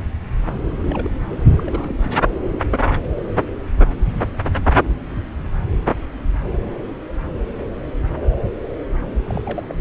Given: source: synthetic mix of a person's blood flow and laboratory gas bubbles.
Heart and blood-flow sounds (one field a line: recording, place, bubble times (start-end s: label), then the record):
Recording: Doppler ultrasound of blood flow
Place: subclavian vein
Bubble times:
0.81-1.10 s: bubbles
1.52-1.95 s: bubbles
2.01-2.12 s: bubbles
9.24-9.42 s: bubbles
9.45-9.66 s: bubbles
9.69-9.75 s: bubbles
From the record:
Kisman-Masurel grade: 221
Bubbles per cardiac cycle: several, 3 to 8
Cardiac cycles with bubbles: 10 to 50%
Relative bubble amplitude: barely perceptible (0.100 to 0.250)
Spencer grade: 2 (many but less than half of the cardiac periods contain bubble signals, singularly or in groups)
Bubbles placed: anywhere in the cardiac cycle